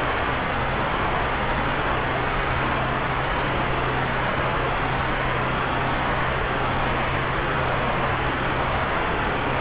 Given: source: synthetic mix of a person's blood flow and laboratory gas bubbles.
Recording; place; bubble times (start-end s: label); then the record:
Doppler ultrasound of blood flow; subclavian vein
no bubbles
From the record:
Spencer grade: 0 (complete lack of bubble signals)